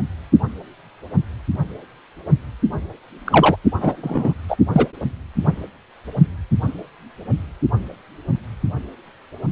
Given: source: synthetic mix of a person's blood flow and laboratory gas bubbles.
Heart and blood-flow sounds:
Doppler ultrasound of blood flow; precordium
3.25-3.56 s: bubbles
3.80-4.34 s: bubbles
4.48-4.56 s: bubbles
4.73-4.87 s: bubbles
From the record:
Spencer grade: 2 (many but less than half of the cardiac periods contain bubble signals, singularly or in groups); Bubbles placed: anywhere in the cardiac cycle

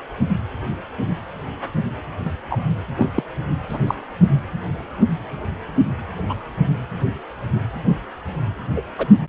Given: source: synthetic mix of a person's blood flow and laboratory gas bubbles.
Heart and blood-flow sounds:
Doppler ultrasound of blood flow; precordium
2.25-2.30 s: bubbles
2.49-2.60 s: bubbles
2.97-3.10 s: bubbles
3.15-3.23 s: bubbles
3.69-3.78 s: bubbles
3.86-3.94 s: bubbles
6.29-6.34 s: bubbles
8.76-8.81 s: bubbles
8.98-9.06 s: bubbles
From the record:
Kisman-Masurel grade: 122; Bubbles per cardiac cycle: 1 to 2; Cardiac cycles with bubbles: 10 to 50%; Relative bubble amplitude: moderate (0.250 to 0.450); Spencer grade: 2 (many but less than half of the cardiac periods contain bubble signals, singularly or in groups); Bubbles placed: anywhere in the cardiac cycle

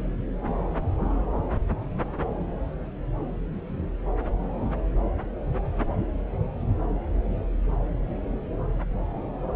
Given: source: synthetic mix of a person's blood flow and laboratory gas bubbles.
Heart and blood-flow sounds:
Doppler ultrasound of blood flow; subclavian vein
no bubbles
From the record:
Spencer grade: 0 (complete lack of bubble signals)

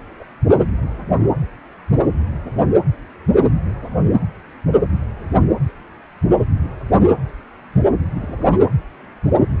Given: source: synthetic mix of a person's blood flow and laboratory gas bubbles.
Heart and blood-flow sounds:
Doppler ultrasound of blood flow; precordium
0.20-0.24 s: bubbles
2.56-2.61 s: bubbles
8.20-8.58 s: bubbles
From the record:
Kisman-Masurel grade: 121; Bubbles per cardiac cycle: 1 to 2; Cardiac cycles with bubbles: 10 to 50%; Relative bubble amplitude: barely perceptible (0.100 to 0.250); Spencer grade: 2 (many but less than half of the cardiac periods contain bubble signals, singularly or in groups); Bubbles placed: anywhere in the cardiac cycle

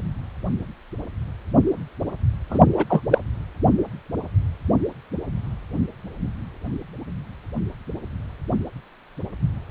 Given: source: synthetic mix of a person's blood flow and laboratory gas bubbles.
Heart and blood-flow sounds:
Doppler ultrasound of blood flow; precordium
2.50-2.58 s: bubbles
2.73-2.85 s: bubbles
2.89-3.01 s: bubbles
3.11-3.19 s: bubbles
From the record:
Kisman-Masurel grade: 213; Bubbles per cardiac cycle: several, 3 to 8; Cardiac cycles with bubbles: 1 to 10%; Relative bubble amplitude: loud (0.450 to 0.775); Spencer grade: 1 (occasional bubble signal discernible with the cardiac motion signal, with majority of cardiac periods free of bubbles); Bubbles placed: anywhere in the cardiac cycle

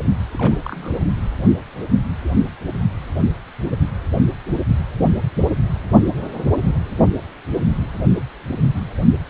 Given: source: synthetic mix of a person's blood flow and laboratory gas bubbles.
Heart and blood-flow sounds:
Doppler ultrasound of blood flow; precordium
0.33-0.59 s: bubbles
0.65-1.01 s: bubbles
From the record:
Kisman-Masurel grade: 211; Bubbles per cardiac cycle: several, 3 to 8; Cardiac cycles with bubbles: 1 to 10%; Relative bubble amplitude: barely perceptible (0.100 to 0.250); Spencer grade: 1 (occasional bubble signal discernible with the cardiac motion signal, with majority of cardiac periods free of bubbles); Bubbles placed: anywhere in the cardiac cycle

